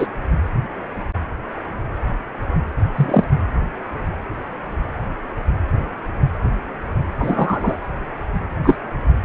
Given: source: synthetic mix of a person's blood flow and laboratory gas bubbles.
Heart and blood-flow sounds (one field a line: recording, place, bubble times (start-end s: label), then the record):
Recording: Doppler ultrasound of blood flow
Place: precordium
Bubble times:
0.00-0.07 s: bubbles
2.95-3.24 s: bubbles
7.19-7.76 s: bubbles
8.62-8.76 s: bubbles
From the record:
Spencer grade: 2 (many but less than half of the cardiac periods contain bubble signals, singularly or in groups)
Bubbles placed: anywhere in the cardiac cycle